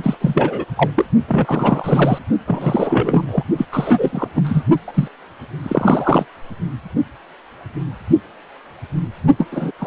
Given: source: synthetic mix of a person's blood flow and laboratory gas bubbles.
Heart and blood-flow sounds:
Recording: Doppler ultrasound of blood flow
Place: precordium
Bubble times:
0.03-0.17 s: bubbles
0.21-0.65 s: bubbles
0.76-0.91 s: bubbles
0.94-1.05 s: bubbles
1.27-2.19 s: bubbles
2.46-3.44 s: bubbles
3.57-3.65 s: bubbles
3.71-4.28 s: bubbles
4.35-4.62 s: bubbles
4.88-5.08 s: bubbles
5.62-6.25 s: bubbles
9.38-9.46 s: bubbles
9.51-9.71 s: bubbles
9.79-9.87 s: bubbles
From the record:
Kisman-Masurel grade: 333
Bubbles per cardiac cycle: rolling drumbeat, 9 or more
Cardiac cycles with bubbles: 50 to 99%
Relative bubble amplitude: loud (0.450 to 0.775)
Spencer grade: 3 (all of the cardiac periods contain showers or single bubble signals, but not dominating or overriding the cardiac motion signals)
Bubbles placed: only in the low amplitude regions of the cardiac cycle

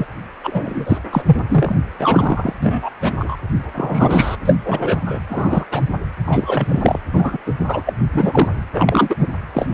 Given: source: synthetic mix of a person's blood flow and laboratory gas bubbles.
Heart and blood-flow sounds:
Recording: Doppler ultrasound of blood flow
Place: precordium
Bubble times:
0.00-0.07 s: bubbles
0.43-0.98 s: bubbles
1.12-1.40 s: bubbles
1.50-1.75 s: bubbles
1.99-2.53 s: bubbles
2.62-2.90 s: bubbles
3.00-3.35 s: bubbles
3.75-4.37 s: bubbles
4.46-4.56 s: bubbles
4.65-5.21 s: bubbles
5.29-5.66 s: bubbles
5.71-5.82 s: bubbles
6.27-6.99 s: bubbles
7.13-7.38 s: bubbles
7.46-7.54 s: bubbles
7.59-7.82 s: bubbles
7.86-7.93 s: bubbles
8.12-8.48 s: bubbles
8.73-9.15 s: bubbles
9.19-9.28 s: bubbles
9.53-9.68 s: bubbles
From the record:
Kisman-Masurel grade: 243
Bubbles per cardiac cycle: several, 3 to 8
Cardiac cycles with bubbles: 100%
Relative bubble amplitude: loud (0.450 to 0.775)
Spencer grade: 3 (all of the cardiac periods contain showers or single bubble signals, but not dominating or overriding the cardiac motion signals)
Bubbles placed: anywhere in the cardiac cycle

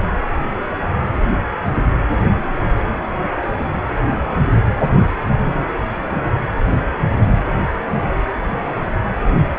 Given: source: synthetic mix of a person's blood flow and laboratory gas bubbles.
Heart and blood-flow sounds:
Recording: Doppler ultrasound of blood flow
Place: precordium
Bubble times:
no bubbles
From the record:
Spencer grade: 0 (complete lack of bubble signals)

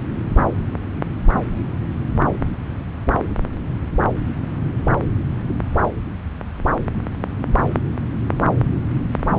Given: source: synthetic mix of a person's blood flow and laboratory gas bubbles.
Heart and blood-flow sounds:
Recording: Doppler ultrasound of blood flow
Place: subclavian vein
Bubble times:
no bubbles
From the record:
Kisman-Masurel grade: 000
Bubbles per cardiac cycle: 0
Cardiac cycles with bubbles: 0%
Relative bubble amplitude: no bubbles discernible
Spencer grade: 0 (complete lack of bubble signals)

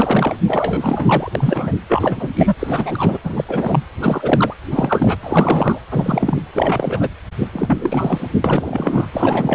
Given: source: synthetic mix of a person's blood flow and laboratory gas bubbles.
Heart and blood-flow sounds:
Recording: Doppler ultrasound of blood flow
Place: precordium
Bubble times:
0.00-0.36 s: bubbles
0.47-1.32 s: bubbles
1.35-1.72 s: bubbles
1.89-2.28 s: bubbles
2.36-2.54 s: bubbles
2.59-3.17 s: bubbles
3.23-3.44 s: bubbles
3.48-3.83 s: bubbles
4.01-4.54 s: bubbles
4.70-5.18 s: bubbles
5.23-5.79 s: bubbles
5.91-6.42 s: bubbles
6.53-7.08 s: bubbles
7.39-7.47 s: bubbles
7.53-8.28 s: bubbles
8.44-9.05 s: bubbles
9.13-9.55 s: bubbles
From the record:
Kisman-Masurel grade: 343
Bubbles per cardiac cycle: rolling drumbeat, 9 or more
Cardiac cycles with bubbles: 100%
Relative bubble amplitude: loud (0.450 to 0.775)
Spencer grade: 3 (all of the cardiac periods contain showers or single bubble signals, but not dominating or overriding the cardiac motion signals)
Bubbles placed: anywhere in the cardiac cycle

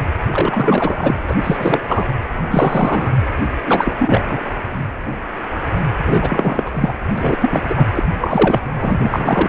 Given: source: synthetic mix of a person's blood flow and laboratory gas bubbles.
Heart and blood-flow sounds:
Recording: Doppler ultrasound of blood flow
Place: precordium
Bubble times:
0.00-0.03 s: bubbles
0.31-1.15 s: bubbles
1.28-1.35 s: bubbles
1.44-1.80 s: bubbles
1.88-2.05 s: bubbles
2.50-3.09 s: bubbles
3.67-3.92 s: bubbles
3.99-4.38 s: bubbles
6.04-6.71 s: bubbles
6.74-6.93 s: bubbles
7.17-7.37 s: bubbles
7.41-7.62 s: bubbles
7.68-7.86 s: bubbles
7.94-8.05 s: bubbles
8.21-8.62 s: bubbles
8.81-9.49 s: bubbles
From the record:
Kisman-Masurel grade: 333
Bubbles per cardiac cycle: rolling drumbeat, 9 or more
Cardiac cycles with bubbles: 50 to 99%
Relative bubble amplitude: loud (0.450 to 0.775)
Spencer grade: 3 (all of the cardiac periods contain showers or single bubble signals, but not dominating or overriding the cardiac motion signals)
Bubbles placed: anywhere in the cardiac cycle

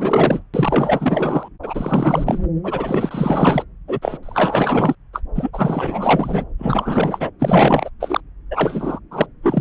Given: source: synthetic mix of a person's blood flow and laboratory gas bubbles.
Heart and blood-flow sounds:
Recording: Doppler ultrasound of blood flow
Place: subclavian vein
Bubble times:
0.00-0.42 s: bubbles
0.53-1.48 s: bubbles
1.62-2.40 s: bubbles
2.63-3.65 s: bubbles
3.88-3.99 s: bubbles
4.01-4.18 s: bubbles
4.22-4.95 s: bubbles
5.13-5.21 s: bubbles
5.35-6.44 s: bubbles
6.58-7.30 s: bubbles
7.39-7.89 s: bubbles
8.00-8.21 s: bubbles
8.50-8.99 s: bubbles
9.11-9.26 s: bubbles
9.42-9.61 s: bubbles
From the record:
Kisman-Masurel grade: 444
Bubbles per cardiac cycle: continuous sound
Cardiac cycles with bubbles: 100%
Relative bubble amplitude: maximal (0.775 to 0.999)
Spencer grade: 4 (maximum detectable bubble signal sounding continuously throughout systole and diastole of every cardiac period, and overriding the amplitude of the normal cardiac signals)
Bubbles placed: anywhere in the cardiac cycle

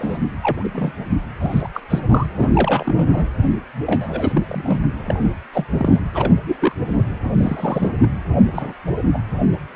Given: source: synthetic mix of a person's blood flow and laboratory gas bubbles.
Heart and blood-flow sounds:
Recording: Doppler ultrasound of blood flow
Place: precordium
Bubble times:
0.00-0.18 s: bubbles
0.41-0.68 s: bubbles
0.73-0.92 s: bubbles
1.41-1.68 s: bubbles
1.74-1.80 s: bubbles
1.90-1.99 s: bubbles
2.09-2.26 s: bubbles
2.36-3.07 s: bubbles
3.12-3.27 s: bubbles
3.86-4.32 s: bubbles
4.35-4.82 s: bubbles
5.07-5.30 s: bubbles
5.54-5.65 s: bubbles
5.79-6.01 s: bubbles
6.15-6.33 s: bubbles
6.44-6.75 s: bubbles
6.87-7.04 s: bubbles
7.38-7.89 s: bubbles
8.02-8.09 s: bubbles
8.53-8.73 s: bubbles
8.87-8.94 s: bubbles
9.13-9.21 s: bubbles
From the record:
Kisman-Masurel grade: 232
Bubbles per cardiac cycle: several, 3 to 8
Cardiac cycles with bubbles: 50 to 99%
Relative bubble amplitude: moderate (0.250 to 0.450)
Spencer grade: 3 (all of the cardiac periods contain showers or single bubble signals, but not dominating or overriding the cardiac motion signals)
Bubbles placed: anywhere in the cardiac cycle

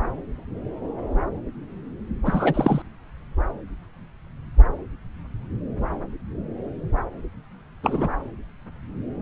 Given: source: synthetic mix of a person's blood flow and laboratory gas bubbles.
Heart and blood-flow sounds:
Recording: Doppler ultrasound of blood flow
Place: subclavian vein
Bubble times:
2.25-2.82 s: bubbles
7.83-8.08 s: bubbles
From the record:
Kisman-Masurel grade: 222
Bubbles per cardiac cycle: several, 3 to 8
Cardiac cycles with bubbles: 10 to 50%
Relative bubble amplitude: moderate (0.250 to 0.450)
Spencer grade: 2 (many but less than half of the cardiac periods contain bubble signals, singularly or in groups)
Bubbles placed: anywhere in the cardiac cycle

